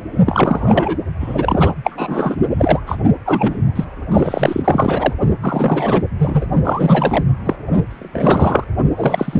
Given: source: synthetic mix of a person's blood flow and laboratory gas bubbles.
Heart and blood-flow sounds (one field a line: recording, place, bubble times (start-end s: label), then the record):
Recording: Doppler ultrasound of blood flow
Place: precordium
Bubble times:
0.26-0.97 s: bubbles
1.20-1.73 s: bubbles
1.84-2.36 s: bubbles
2.58-2.81 s: bubbles
2.87-2.97 s: bubbles
3.25-3.60 s: bubbles
3.75-3.84 s: bubbles
4.11-5.13 s: bubbles
5.42-6.03 s: bubbles
6.18-6.46 s: bubbles
6.64-7.25 s: bubbles
7.44-7.56 s: bubbles
7.90-8.64 s: bubbles
8.96-9.40 s: bubbles
From the record:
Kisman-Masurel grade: 333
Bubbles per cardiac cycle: rolling drumbeat, 9 or more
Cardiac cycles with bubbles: 50 to 99%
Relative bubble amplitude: loud (0.450 to 0.775)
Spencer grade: 3 (all of the cardiac periods contain showers or single bubble signals, but not dominating or overriding the cardiac motion signals)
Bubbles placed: only in the low amplitude regions of the cardiac cycle